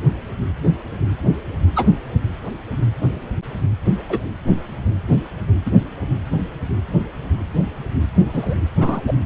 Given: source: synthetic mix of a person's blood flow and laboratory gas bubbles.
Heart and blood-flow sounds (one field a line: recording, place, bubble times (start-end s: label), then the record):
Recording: Doppler ultrasound of blood flow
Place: precordium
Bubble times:
1.75-1.88 s: bubbles
4.09-4.24 s: bubbles
5.65-5.71 s: bubbles
8.32-8.55 s: bubbles
8.78-9.02 s: bubbles
9.07-9.13 s: bubbles
From the record:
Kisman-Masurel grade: 123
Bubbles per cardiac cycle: 1 to 2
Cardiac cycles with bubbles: 10 to 50%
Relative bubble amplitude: loud (0.450 to 0.775)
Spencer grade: 2 (many but less than half of the cardiac periods contain bubble signals, singularly or in groups)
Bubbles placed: anywhere in the cardiac cycle